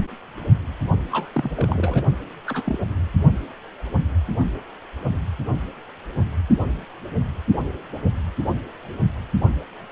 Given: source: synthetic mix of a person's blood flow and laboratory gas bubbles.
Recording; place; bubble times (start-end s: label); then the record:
Doppler ultrasound of blood flow; precordium
1.11-1.29 s: bubbles
1.33-2.02 s: bubbles
2.46-2.63 s: bubbles
2.65-2.78 s: bubbles
From the record:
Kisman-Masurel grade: 221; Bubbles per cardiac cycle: several, 3 to 8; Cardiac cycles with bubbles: 10 to 50%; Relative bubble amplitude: barely perceptible (0.100 to 0.250); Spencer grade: 2 (many but less than half of the cardiac periods contain bubble signals, singularly or in groups); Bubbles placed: only in the low amplitude regions of the cardiac cycle